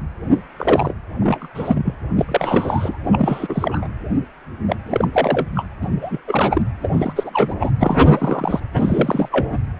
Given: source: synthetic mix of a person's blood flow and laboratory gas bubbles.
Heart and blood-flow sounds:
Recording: Doppler ultrasound of blood flow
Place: precordium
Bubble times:
0.56-0.93 s: bubbles
1.20-1.48 s: bubbles
1.54-1.95 s: bubbles
2.16-2.25 s: bubbles
2.28-2.98 s: bubbles
3.04-3.88 s: bubbles
4.67-4.76 s: bubbles
4.85-5.08 s: bubbles
5.12-5.46 s: bubbles
5.54-5.65 s: bubbles
5.81-5.88 s: bubbles
6.00-6.18 s: bubbles
6.26-6.62 s: bubbles
6.82-7.13 s: bubbles
7.15-7.30 s: bubbles
7.33-7.54 s: bubbles
7.59-7.71 s: bubbles
7.79-8.60 s: bubbles
8.76-9.58 s: bubbles
From the record:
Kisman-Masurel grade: 332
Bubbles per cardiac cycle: rolling drumbeat, 9 or more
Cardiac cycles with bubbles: 50 to 99%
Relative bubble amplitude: moderate (0.250 to 0.450)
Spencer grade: 3 (all of the cardiac periods contain showers or single bubble signals, but not dominating or overriding the cardiac motion signals)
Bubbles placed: anywhere in the cardiac cycle

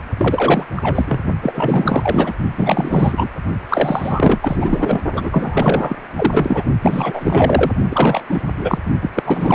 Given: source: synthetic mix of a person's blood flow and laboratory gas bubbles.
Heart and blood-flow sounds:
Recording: Doppler ultrasound of blood flow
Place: precordium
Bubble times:
0.18-0.69 s: bubbles
0.76-1.21 s: bubbles
1.42-2.33 s: bubbles
2.57-3.29 s: bubbles
3.69-4.39 s: bubbles
4.42-5.00 s: bubbles
5.13-5.96 s: bubbles
6.17-6.63 s: bubbles
6.82-7.71 s: bubbles
7.90-8.22 s: bubbles
8.29-8.42 s: bubbles
8.58-8.79 s: bubbles
9.01-9.11 s: bubbles
9.15-9.22 s: bubbles
9.26-9.55 s: bubbles
From the record:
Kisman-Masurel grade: 444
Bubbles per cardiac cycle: continuous sound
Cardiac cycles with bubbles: 100%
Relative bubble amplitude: maximal (0.775 to 0.999)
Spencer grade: 4 (maximum detectable bubble signal sounding continuously throughout systole and diastole of every cardiac period, and overriding the amplitude of the normal cardiac signals)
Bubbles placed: only in the low amplitude regions of the cardiac cycle

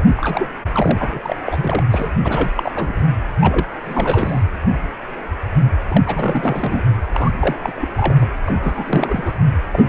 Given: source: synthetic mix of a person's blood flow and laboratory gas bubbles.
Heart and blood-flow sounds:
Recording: Doppler ultrasound of blood flow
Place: precordium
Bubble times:
0.16-0.48 s: bubbles
0.74-1.20 s: bubbles
1.23-1.36 s: bubbles
1.44-1.82 s: bubbles
1.91-2.10 s: bubbles
2.24-2.51 s: bubbles
2.54-2.93 s: bubbles
3.40-3.66 s: bubbles
3.83-4.42 s: bubbles
5.88-6.02 s: bubbles
6.06-6.81 s: bubbles
7.14-7.30 s: bubbles
7.39-7.56 s: bubbles
7.62-7.72 s: bubbles
7.75-7.90 s: bubbles
7.97-8.27 s: bubbles
8.47-9.33 s: bubbles
9.71-9.83 s: bubbles
9.86-9.89 s: bubbles
From the record:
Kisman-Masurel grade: 332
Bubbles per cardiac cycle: rolling drumbeat, 9 or more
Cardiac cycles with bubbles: 50 to 99%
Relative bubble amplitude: moderate (0.250 to 0.450)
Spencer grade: 3 (all of the cardiac periods contain showers or single bubble signals, but not dominating or overriding the cardiac motion signals)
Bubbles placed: anywhere in the cardiac cycle

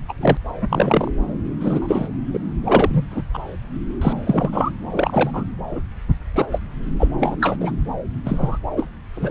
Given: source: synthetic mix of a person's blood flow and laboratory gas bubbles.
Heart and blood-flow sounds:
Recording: Doppler ultrasound of blood flow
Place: subclavian vein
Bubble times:
0.09-0.14 s: bubbles
0.18-0.37 s: bubbles
0.60-1.10 s: bubbles
1.60-2.08 s: bubbles
2.33-2.39 s: bubbles
2.65-3.03 s: bubbles
3.11-3.22 s: bubbles
3.33-3.39 s: bubbles
4.01-4.13 s: bubbles
4.26-4.71 s: bubbles
4.90-5.30 s: bubbles
5.33-5.44 s: bubbles
5.71-5.80 s: bubbles
6.34-6.46 s: bubbles
6.51-6.60 s: bubbles
7.00-7.08 s: bubbles
7.19-7.36 s: bubbles
7.40-7.56 s: bubbles
7.60-7.71 s: bubbles
8.25-8.58 s: bubbles
8.75-8.87 s: bubbles
9.15-9.31 s: bubbles
From the record:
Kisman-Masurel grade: 233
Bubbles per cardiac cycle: several, 3 to 8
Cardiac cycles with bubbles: 50 to 99%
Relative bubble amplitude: loud (0.450 to 0.775)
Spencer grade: 3 (all of the cardiac periods contain showers or single bubble signals, but not dominating or overriding the cardiac motion signals)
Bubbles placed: anywhere in the cardiac cycle

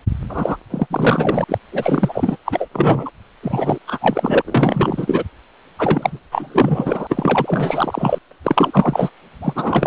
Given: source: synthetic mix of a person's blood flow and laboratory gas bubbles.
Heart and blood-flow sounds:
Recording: Doppler ultrasound of blood flow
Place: precordium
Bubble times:
0.28-0.57 s: bubbles
0.70-0.86 s: bubbles
0.90-1.45 s: bubbles
1.48-1.58 s: bubbles
1.72-2.37 s: bubbles
2.45-2.69 s: bubbles
2.73-3.11 s: bubbles
3.43-3.79 s: bubbles
3.87-4.42 s: bubbles
4.45-5.24 s: bubbles
5.79-6.20 s: bubbles
6.32-8.19 s: bubbles
8.31-8.34 s: bubbles
8.44-9.10 s: bubbles
9.42-9.87 s: bubbles
From the record:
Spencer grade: 4 (maximum detectable bubble signal sounding continuously throughout systole and diastole of every cardiac period, and overriding the amplitude of the normal cardiac signals)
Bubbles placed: anywhere in the cardiac cycle

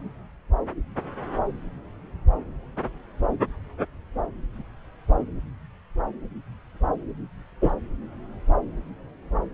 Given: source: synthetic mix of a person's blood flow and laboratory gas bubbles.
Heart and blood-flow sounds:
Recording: Doppler ultrasound of blood flow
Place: subclavian vein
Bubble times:
7.61-7.70 s: bubbles
From the record:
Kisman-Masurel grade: 123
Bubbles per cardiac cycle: 1 to 2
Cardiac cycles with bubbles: 10 to 50%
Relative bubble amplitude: loud (0.450 to 0.775)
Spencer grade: 2 (many but less than half of the cardiac periods contain bubble signals, singularly or in groups)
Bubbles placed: anywhere in the cardiac cycle

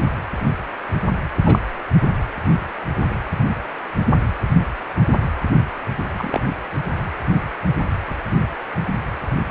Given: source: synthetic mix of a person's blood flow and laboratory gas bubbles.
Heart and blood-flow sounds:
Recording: Doppler ultrasound of blood flow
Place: precordium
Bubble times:
1.45-1.59 s: bubbles
6.17-6.43 s: bubbles
From the record:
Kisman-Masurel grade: 122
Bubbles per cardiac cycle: 1 to 2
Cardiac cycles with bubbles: 10 to 50%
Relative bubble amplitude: moderate (0.250 to 0.450)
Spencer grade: 2 (many but less than half of the cardiac periods contain bubble signals, singularly or in groups)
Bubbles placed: anywhere in the cardiac cycle

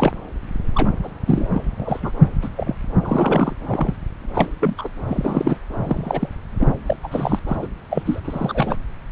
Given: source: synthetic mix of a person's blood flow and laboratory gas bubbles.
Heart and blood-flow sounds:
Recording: Doppler ultrasound of blood flow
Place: subclavian vein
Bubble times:
0.00-0.12 s: bubbles
0.76-0.90 s: bubbles
1.03-1.08 s: bubbles
1.26-1.48 s: bubbles
1.53-1.62 s: bubbles
1.79-2.00 s: bubbles
2.02-2.11 s: bubbles
2.42-2.48 s: bubbles
2.56-2.75 s: bubbles
3.02-3.52 s: bubbles
3.67-3.95 s: bubbles
4.34-4.50 s: bubbles
4.60-4.88 s: bubbles
5.07-5.57 s: bubbles
5.83-6.29 s: bubbles
6.60-6.67 s: bubbles
6.86-6.96 s: bubbles
7.03-7.08 s: bubbles
7.12-7.39 s: bubbles
7.47-7.57 s: bubbles
7.62-7.67 s: bubbles
7.90-8.21 s: bubbles
8.24-8.76 s: bubbles
From the record:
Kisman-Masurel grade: 242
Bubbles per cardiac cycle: several, 3 to 8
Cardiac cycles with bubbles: 100%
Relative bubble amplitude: moderate (0.250 to 0.450)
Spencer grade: 3 (all of the cardiac periods contain showers or single bubble signals, but not dominating or overriding the cardiac motion signals)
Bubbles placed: anywhere in the cardiac cycle

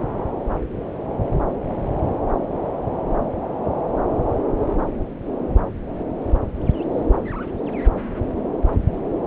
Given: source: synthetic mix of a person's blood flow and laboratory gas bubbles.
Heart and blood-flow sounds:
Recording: Doppler ultrasound of blood flow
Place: subclavian vein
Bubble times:
no bubbles
From the record:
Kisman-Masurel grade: 000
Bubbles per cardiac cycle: 0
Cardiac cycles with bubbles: 0%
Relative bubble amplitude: no bubbles discernible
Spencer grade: 0 (complete lack of bubble signals)

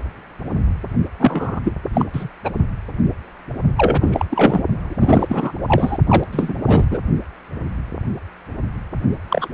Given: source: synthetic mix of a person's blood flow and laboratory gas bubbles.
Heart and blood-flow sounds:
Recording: Doppler ultrasound of blood flow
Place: precordium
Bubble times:
1.19-1.60 s: bubbles
1.64-1.73 s: bubbles
1.93-2.05 s: bubbles
2.13-2.29 s: bubbles
2.44-2.51 s: bubbles
3.77-4.25 s: bubbles
4.30-4.64 s: bubbles
4.84-5.52 s: bubbles
5.65-5.98 s: bubbles
6.07-6.24 s: bubbles
6.32-6.54 s: bubbles
6.65-6.84 s: bubbles
6.90-6.99 s: bubbles
9.29-9.49 s: bubbles
From the record:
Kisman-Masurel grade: 333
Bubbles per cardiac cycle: rolling drumbeat, 9 or more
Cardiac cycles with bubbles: 50 to 99%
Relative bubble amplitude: loud (0.450 to 0.775)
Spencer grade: 3 (all of the cardiac periods contain showers or single bubble signals, but not dominating or overriding the cardiac motion signals)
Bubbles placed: only in the low amplitude regions of the cardiac cycle

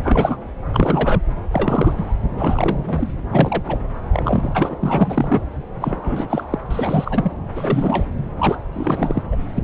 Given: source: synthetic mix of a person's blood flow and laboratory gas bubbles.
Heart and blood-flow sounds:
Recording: Doppler ultrasound of blood flow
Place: subclavian vein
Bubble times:
0.02-0.37 s: bubbles
0.73-1.21 s: bubbles
1.51-2.16 s: bubbles
2.37-3.10 s: bubbles
3.31-3.80 s: bubbles
4.12-4.75 s: bubbles
4.80-5.42 s: bubbles
5.80-6.43 s: bubbles
6.50-6.58 s: bubbles
6.64-6.67 s: bubbles
6.70-7.32 s: bubbles
7.55-8.06 s: bubbles
8.38-8.57 s: bubbles
8.73-9.23 s: bubbles
9.31-9.36 s: bubbles
9.55-9.64 s: bubbles
From the record:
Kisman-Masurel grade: 343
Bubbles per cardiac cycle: rolling drumbeat, 9 or more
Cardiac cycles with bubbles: 100%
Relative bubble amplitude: loud (0.450 to 0.775)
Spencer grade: 3 (all of the cardiac periods contain showers or single bubble signals, but not dominating or overriding the cardiac motion signals)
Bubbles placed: anywhere in the cardiac cycle

